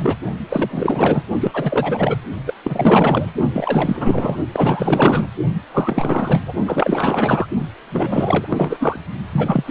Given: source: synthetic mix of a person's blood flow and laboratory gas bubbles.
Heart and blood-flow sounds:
Doppler ultrasound of blood flow; precordium
0.00-0.17 s: bubbles
0.49-1.23 s: bubbles
1.40-2.17 s: bubbles
2.46-2.54 s: bubbles
2.64-3.31 s: bubbles
3.53-4.37 s: bubbles
4.52-5.28 s: bubbles
5.74-6.42 s: bubbles
6.46-6.53 s: bubbles
6.67-7.46 s: bubbles
7.89-8.99 s: bubbles
9.31-9.71 s: bubbles
From the record:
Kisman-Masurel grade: 444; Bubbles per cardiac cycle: continuous sound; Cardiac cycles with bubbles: 100%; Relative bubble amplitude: maximal (0.775 to 0.999); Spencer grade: 4 (maximum detectable bubble signal sounding continuously throughout systole and diastole of every cardiac period, and overriding the amplitude of the normal cardiac signals); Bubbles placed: only in the low amplitude regions of the cardiac cycle

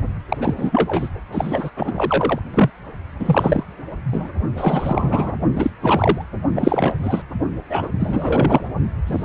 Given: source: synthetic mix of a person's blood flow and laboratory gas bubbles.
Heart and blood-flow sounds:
Doppler ultrasound of blood flow; precordium
0.28-0.38 s: bubbles
0.41-0.54 s: bubbles
0.57-1.09 s: bubbles
1.31-1.70 s: bubbles
1.76-2.40 s: bubbles
2.54-2.70 s: bubbles
3.19-3.64 s: bubbles
4.12-4.29 s: bubbles
4.57-5.34 s: bubbles
5.55-5.71 s: bubbles
5.82-6.24 s: bubbles
6.55-6.95 s: bubbles
7.03-7.22 s: bubbles
7.69-7.88 s: bubbles
8.00-8.64 s: bubbles
9.06-9.23 s: bubbles
From the record:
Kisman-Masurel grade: 343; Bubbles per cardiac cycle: rolling drumbeat, 9 or more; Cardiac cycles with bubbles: 100%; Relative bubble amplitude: loud (0.450 to 0.775); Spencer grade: 3 (all of the cardiac periods contain showers or single bubble signals, but not dominating or overriding the cardiac motion signals); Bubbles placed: only in the low amplitude regions of the cardiac cycle

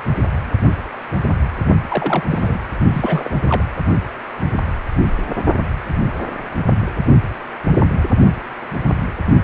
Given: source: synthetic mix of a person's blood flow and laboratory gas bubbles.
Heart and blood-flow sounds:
Doppler ultrasound of blood flow; precordium
0.00-0.03 s: bubbles
1.89-2.23 s: bubbles
2.29-2.60 s: bubbles
2.90-3.31 s: bubbles
3.44-3.65 s: bubbles
From the record:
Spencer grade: 2 (many but less than half of the cardiac periods contain bubble signals, singularly or in groups); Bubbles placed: only in the low amplitude regions of the cardiac cycle

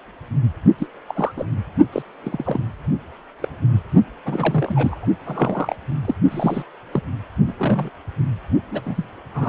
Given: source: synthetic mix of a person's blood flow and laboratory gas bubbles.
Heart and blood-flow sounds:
Doppler ultrasound of blood flow; precordium
0.78-0.87 s: bubbles
1.08-1.31 s: bubbles
1.36-1.46 s: bubbles
1.92-2.02 s: bubbles
2.23-2.63 s: bubbles
3.40-3.48 s: bubbles
4.25-5.06 s: bubbles
5.25-5.75 s: bubbles
6.05-6.15 s: bubbles
6.31-6.63 s: bubbles
6.92-7.02 s: bubbles
7.46-7.53 s: bubbles
7.57-7.90 s: bubbles
8.71-9.11 s: bubbles
9.34-9.49 s: bubbles
From the record:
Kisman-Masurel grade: 242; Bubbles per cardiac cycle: several, 3 to 8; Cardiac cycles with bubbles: 100%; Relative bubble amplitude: moderate (0.250 to 0.450); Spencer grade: 3 (all of the cardiac periods contain showers or single bubble signals, but not dominating or overriding the cardiac motion signals); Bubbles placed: only in the low amplitude regions of the cardiac cycle

